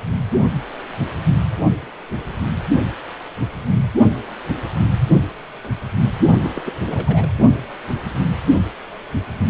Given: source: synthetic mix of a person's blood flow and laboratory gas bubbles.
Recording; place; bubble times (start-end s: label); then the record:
Doppler ultrasound of blood flow; precordium
6.44-6.62 s: bubbles
6.66-6.73 s: bubbles
6.84-7.31 s: bubbles
From the record:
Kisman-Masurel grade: 211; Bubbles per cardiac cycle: several, 3 to 8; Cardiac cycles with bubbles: 1 to 10%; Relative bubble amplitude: barely perceptible (0.100 to 0.250); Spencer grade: 1 (occasional bubble signal discernible with the cardiac motion signal, with majority of cardiac periods free of bubbles); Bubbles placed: only in the low amplitude regions of the cardiac cycle